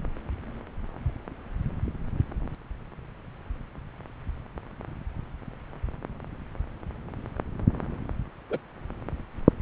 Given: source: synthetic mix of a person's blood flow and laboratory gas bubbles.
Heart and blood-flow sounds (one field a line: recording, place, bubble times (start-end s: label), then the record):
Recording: Doppler ultrasound of blood flow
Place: subclavian vein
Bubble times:
8.50-8.58 s: bubbles
From the record:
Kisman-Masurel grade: 112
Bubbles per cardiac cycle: 1 to 2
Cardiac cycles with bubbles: 1 to 10%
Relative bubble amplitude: moderate (0.250 to 0.450)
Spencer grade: 1 (occasional bubble signal discernible with the cardiac motion signal, with majority of cardiac periods free of bubbles)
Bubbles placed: anywhere in the cardiac cycle